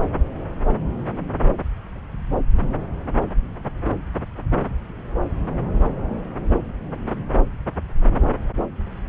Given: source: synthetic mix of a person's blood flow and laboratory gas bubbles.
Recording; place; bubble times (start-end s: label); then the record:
Doppler ultrasound of blood flow; subclavian vein
no bubbles
From the record:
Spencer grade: 0 (complete lack of bubble signals)